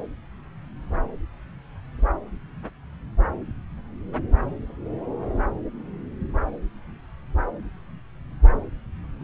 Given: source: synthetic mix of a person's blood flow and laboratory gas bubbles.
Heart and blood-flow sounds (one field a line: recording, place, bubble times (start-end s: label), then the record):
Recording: Doppler ultrasound of blood flow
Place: subclavian vein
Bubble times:
no bubbles
From the record:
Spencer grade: 0 (complete lack of bubble signals)